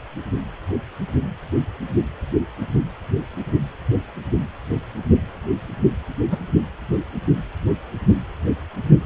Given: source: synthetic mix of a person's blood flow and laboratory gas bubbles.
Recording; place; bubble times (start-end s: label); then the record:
Doppler ultrasound of blood flow; precordium
6.31-6.38 s: bubbles
From the record:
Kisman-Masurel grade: 112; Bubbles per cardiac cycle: 1 to 2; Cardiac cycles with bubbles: 1 to 10%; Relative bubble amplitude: moderate (0.250 to 0.450); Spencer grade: 1 (occasional bubble signal discernible with the cardiac motion signal, with majority of cardiac periods free of bubbles); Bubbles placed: anywhere in the cardiac cycle